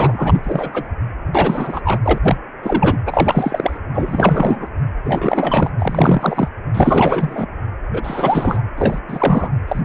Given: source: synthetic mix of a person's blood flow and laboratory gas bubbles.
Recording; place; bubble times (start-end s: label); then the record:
Doppler ultrasound of blood flow; precordium
0.00-0.41 s: bubbles
0.43-0.90 s: bubbles
1.34-1.81 s: bubbles
1.85-1.99 s: bubbles
2.04-2.19 s: bubbles
2.24-2.38 s: bubbles
2.62-2.97 s: bubbles
3.07-3.79 s: bubbles
3.94-4.67 s: bubbles
5.04-5.71 s: bubbles
5.79-6.49 s: bubbles
6.74-7.46 s: bubbles
7.92-8.62 s: bubbles
8.77-8.99 s: bubbles
9.08-9.52 s: bubbles
9.68-9.81 s: bubbles
From the record:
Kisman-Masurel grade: 343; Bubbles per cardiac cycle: rolling drumbeat, 9 or more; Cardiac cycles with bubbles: 100%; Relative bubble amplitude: loud (0.450 to 0.775); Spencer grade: 3 (all of the cardiac periods contain showers or single bubble signals, but not dominating or overriding the cardiac motion signals); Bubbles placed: anywhere in the cardiac cycle